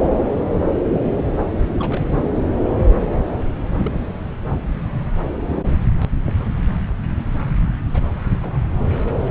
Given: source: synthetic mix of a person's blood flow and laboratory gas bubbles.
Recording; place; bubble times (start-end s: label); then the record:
Doppler ultrasound of blood flow; subclavian vein
1.79-2.01 s: bubbles
3.83-3.92 s: bubbles
7.93-8.00 s: bubbles
8.29-8.65 s: bubbles
From the record:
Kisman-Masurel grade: 121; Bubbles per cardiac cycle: 1 to 2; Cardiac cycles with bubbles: 10 to 50%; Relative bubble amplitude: barely perceptible (0.100 to 0.250); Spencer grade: 2 (many but less than half of the cardiac periods contain bubble signals, singularly or in groups); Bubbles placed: anywhere in the cardiac cycle